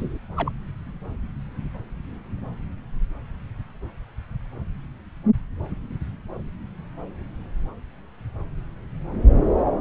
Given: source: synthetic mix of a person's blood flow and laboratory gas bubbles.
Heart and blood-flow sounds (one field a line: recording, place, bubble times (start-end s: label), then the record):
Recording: Doppler ultrasound of blood flow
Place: subclavian vein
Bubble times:
0.00-0.17 s: bubbles
0.36-0.53 s: bubbles
From the record:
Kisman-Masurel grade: 211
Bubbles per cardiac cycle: several, 3 to 8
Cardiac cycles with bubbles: 1 to 10%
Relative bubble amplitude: barely perceptible (0.100 to 0.250)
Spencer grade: 1 (occasional bubble signal discernible with the cardiac motion signal, with majority of cardiac periods free of bubbles)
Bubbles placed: anywhere in the cardiac cycle